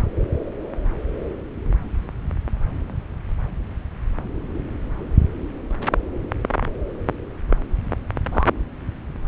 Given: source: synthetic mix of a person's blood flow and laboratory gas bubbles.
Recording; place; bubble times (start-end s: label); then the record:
Doppler ultrasound of blood flow; subclavian vein
6.62-6.66 s: bubbles
8.31-8.49 s: bubbles
From the record:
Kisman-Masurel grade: 121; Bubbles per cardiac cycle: 1 to 2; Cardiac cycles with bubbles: 10 to 50%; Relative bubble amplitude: barely perceptible (0.100 to 0.250); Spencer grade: 2 (many but less than half of the cardiac periods contain bubble signals, singularly or in groups); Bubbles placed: anywhere in the cardiac cycle